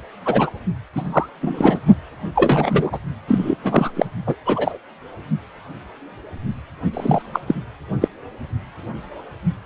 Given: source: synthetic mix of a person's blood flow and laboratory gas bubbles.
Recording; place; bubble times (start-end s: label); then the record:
Doppler ultrasound of blood flow; precordium
0.26-0.51 s: bubbles
0.93-1.29 s: bubbles
1.41-1.80 s: bubbles
2.35-2.99 s: bubbles
3.28-3.56 s: bubbles
3.63-3.91 s: bubbles
3.96-4.06 s: bubbles
4.27-4.35 s: bubbles
4.45-4.78 s: bubbles
6.93-7.22 s: bubbles
7.33-7.41 s: bubbles
7.48-7.54 s: bubbles
8.01-8.08 s: bubbles
From the record:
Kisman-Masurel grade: 233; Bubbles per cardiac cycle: several, 3 to 8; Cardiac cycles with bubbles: 50 to 99%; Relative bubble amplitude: loud (0.450 to 0.775); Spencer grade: 3 (all of the cardiac periods contain showers or single bubble signals, but not dominating or overriding the cardiac motion signals); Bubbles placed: only in the low amplitude regions of the cardiac cycle